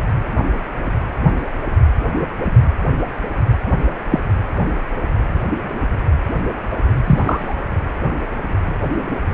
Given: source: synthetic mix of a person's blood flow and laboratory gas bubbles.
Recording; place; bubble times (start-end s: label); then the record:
Doppler ultrasound of blood flow; precordium
4.11-4.20 s: bubbles
7.06-7.56 s: bubbles
From the record:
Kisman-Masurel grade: 123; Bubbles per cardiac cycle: 1 to 2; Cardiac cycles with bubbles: 10 to 50%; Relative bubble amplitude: loud (0.450 to 0.775); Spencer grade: 2 (many but less than half of the cardiac periods contain bubble signals, singularly or in groups); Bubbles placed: anywhere in the cardiac cycle